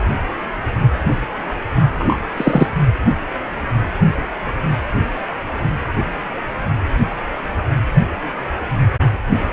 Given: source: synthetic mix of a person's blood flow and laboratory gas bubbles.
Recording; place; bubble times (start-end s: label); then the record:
Doppler ultrasound of blood flow; precordium
1.98-2.17 s: bubbles
2.37-2.67 s: bubbles
From the record:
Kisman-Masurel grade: 113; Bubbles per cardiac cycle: 1 to 2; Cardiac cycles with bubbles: 1 to 10%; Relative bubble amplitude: loud (0.450 to 0.775); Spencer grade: 1 (occasional bubble signal discernible with the cardiac motion signal, with majority of cardiac periods free of bubbles); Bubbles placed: anywhere in the cardiac cycle